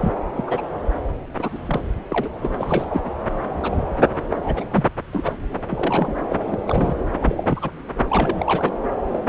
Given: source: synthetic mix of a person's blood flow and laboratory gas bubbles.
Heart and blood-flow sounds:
Doppler ultrasound of blood flow; subclavian vein
0.01-0.12 s: bubbles
0.35-0.61 s: bubbles
1.39-1.59 s: bubbles
1.66-1.80 s: bubbles
2.10-2.29 s: bubbles
2.41-2.51 s: bubbles
2.58-3.10 s: bubbles
3.61-4.06 s: bubbles
4.29-4.38 s: bubbles
4.42-4.64 s: bubbles
4.70-4.87 s: bubbles
5.12-5.33 s: bubbles
5.69-6.15 s: bubbles
6.30-6.36 s: bubbles
6.48-6.58 s: bubbles
6.65-6.96 s: bubbles
7.20-7.71 s: bubbles
8.10-8.74 s: bubbles
9.06-9.10 s: bubbles
9.12-9.21 s: bubbles
From the record:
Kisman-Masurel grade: 242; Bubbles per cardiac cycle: several, 3 to 8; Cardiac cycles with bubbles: 100%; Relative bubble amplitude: moderate (0.250 to 0.450); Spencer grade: 3 (all of the cardiac periods contain showers or single bubble signals, but not dominating or overriding the cardiac motion signals); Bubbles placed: anywhere in the cardiac cycle

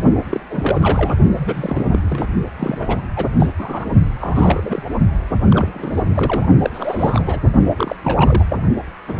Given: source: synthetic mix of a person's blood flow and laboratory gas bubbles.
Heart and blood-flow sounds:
Doppler ultrasound of blood flow; precordium
0.29-0.40 s: bubbles
0.50-1.16 s: bubbles
1.37-1.85 s: bubbles
1.92-1.99 s: bubbles
2.10-2.29 s: bubbles
2.58-3.01 s: bubbles
3.16-3.25 s: bubbles
3.39-3.48 s: bubbles
3.58-3.87 s: bubbles
4.21-4.83 s: bubbles
5.50-5.71 s: bubbles
5.74-6.03 s: bubbles
6.16-6.46 s: bubbles
6.62-6.71 s: bubbles
6.74-7.38 s: bubbles
7.77-7.96 s: bubbles
8.04-8.44 s: bubbles
8.49-8.64 s: bubbles
9.07-9.14 s: bubbles
From the record:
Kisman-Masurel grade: 342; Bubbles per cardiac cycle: rolling drumbeat, 9 or more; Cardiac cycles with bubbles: 100%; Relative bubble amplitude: moderate (0.250 to 0.450); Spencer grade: 3 (all of the cardiac periods contain showers or single bubble signals, but not dominating or overriding the cardiac motion signals); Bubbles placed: only in the low amplitude regions of the cardiac cycle

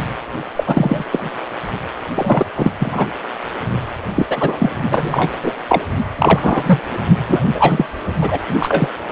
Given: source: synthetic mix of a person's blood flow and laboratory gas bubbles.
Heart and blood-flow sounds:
Doppler ultrasound of blood flow; precordium
0.55-0.64 s: bubbles
0.66-1.05 s: bubbles
1.12-1.19 s: bubbles
2.14-2.46 s: bubbles
2.56-2.72 s: bubbles
2.79-3.06 s: bubbles
4.14-4.25 s: bubbles
4.28-4.70 s: bubbles
4.91-5.33 s: bubbles
5.42-5.51 s: bubbles
5.68-5.82 s: bubbles
6.17-6.79 s: bubbles
7.28-7.42 s: bubbles
7.54-7.84 s: bubbles
8.21-8.38 s: bubbles
8.59-8.88 s: bubbles
9.08-9.12 s: bubbles
From the record:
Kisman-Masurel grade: 243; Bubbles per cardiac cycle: several, 3 to 8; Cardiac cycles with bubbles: 100%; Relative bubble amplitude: loud (0.450 to 0.775); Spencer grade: 3 (all of the cardiac periods contain showers or single bubble signals, but not dominating or overriding the cardiac motion signals); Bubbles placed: only in the low amplitude regions of the cardiac cycle

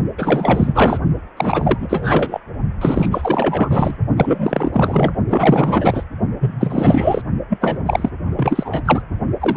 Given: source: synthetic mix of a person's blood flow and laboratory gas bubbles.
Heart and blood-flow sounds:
Doppler ultrasound of blood flow; precordium
0.18-0.97 s: bubbles
1.36-2.41 s: bubbles
2.81-3.96 s: bubbles
4.17-5.13 s: bubbles
5.28-6.04 s: bubbles
6.40-7.21 s: bubbles
7.49-7.58 s: bubbles
7.61-7.79 s: bubbles
7.85-8.09 s: bubbles
8.36-8.82 s: bubbles
8.85-9.02 s: bubbles
9.39-9.57 s: bubbles
From the record:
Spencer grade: 4 (maximum detectable bubble signal sounding continuously throughout systole and diastole of every cardiac period, and overriding the amplitude of the normal cardiac signals); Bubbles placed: only in the low amplitude regions of the cardiac cycle

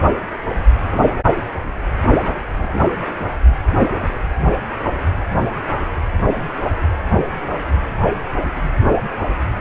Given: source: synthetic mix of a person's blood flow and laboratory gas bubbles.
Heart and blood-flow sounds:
Doppler ultrasound of blood flow; precordium
2.04-2.38 s: bubbles
2.55-2.92 s: bubbles
From the record:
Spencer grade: 1 (occasional bubble signal discernible with the cardiac motion signal, with majority of cardiac periods free of bubbles); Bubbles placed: anywhere in the cardiac cycle

